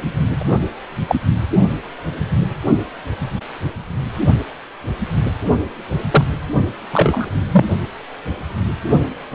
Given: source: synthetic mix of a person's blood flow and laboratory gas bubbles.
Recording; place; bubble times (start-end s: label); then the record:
Doppler ultrasound of blood flow; precordium
0.39-0.69 s: bubbles
1.08-1.16 s: bubbles
6.11-6.25 s: bubbles
6.93-7.30 s: bubbles
7.52-7.65 s: bubbles
From the record:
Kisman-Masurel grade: 123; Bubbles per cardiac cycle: 1 to 2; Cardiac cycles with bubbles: 10 to 50%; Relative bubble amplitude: loud (0.450 to 0.775); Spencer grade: 2 (many but less than half of the cardiac periods contain bubble signals, singularly or in groups); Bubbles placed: only in the low amplitude regions of the cardiac cycle